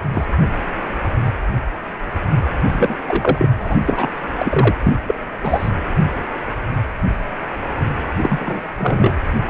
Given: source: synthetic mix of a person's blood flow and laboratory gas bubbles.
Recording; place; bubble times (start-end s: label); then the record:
Doppler ultrasound of blood flow; precordium
0.14-0.25 s: bubbles
2.67-2.96 s: bubbles
3.07-3.48 s: bubbles
3.60-3.76 s: bubbles
3.85-4.09 s: bubbles
4.38-4.75 s: bubbles
4.83-4.95 s: bubbles
5.07-5.15 s: bubbles
5.42-5.70 s: bubbles
8.23-8.61 s: bubbles
8.78-9.18 s: bubbles
From the record:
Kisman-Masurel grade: 233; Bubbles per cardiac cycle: several, 3 to 8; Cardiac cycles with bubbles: 50 to 99%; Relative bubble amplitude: loud (0.450 to 0.775); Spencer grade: 3 (all of the cardiac periods contain showers or single bubble signals, but not dominating or overriding the cardiac motion signals); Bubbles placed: anywhere in the cardiac cycle